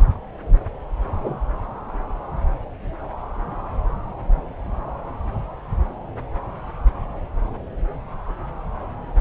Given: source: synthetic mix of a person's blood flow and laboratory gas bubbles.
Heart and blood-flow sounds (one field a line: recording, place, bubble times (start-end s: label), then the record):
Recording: Doppler ultrasound of blood flow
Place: subclavian vein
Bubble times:
1.21-1.40 s: bubbles
From the record:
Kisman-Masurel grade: 112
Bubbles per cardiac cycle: 1 to 2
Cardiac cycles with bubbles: 1 to 10%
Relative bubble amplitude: moderate (0.250 to 0.450)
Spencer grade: 1 (occasional bubble signal discernible with the cardiac motion signal, with majority of cardiac periods free of bubbles)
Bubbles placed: anywhere in the cardiac cycle